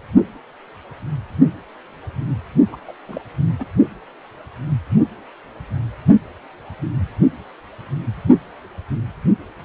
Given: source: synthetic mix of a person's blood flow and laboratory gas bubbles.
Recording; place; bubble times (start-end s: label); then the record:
Doppler ultrasound of blood flow; precordium
2.71-2.76 s: bubbles
2.88-2.92 s: bubbles
3.08-3.21 s: bubbles
3.59-3.65 s: bubbles
From the record:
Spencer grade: 1 (occasional bubble signal discernible with the cardiac motion signal, with majority of cardiac periods free of bubbles); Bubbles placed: only in the low amplitude regions of the cardiac cycle